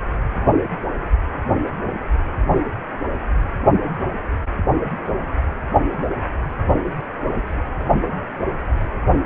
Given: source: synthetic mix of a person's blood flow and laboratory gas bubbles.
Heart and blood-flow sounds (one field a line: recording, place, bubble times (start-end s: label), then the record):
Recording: Doppler ultrasound of blood flow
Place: precordium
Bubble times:
no bubbles
From the record:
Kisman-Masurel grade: 000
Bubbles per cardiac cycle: 0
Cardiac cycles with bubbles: 0%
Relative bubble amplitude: no bubbles discernible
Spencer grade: 0 (complete lack of bubble signals)